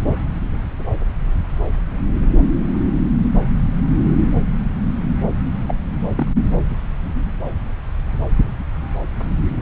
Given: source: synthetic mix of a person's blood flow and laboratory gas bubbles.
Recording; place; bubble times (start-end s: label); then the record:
Doppler ultrasound of blood flow; subclavian vein
5.67-5.75 s: bubbles
6.16-6.40 s: bubbles
From the record:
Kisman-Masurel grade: 111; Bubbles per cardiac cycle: 1 to 2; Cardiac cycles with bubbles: 1 to 10%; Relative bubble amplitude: barely perceptible (0.100 to 0.250); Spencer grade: 1 (occasional bubble signal discernible with the cardiac motion signal, with majority of cardiac periods free of bubbles); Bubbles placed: anywhere in the cardiac cycle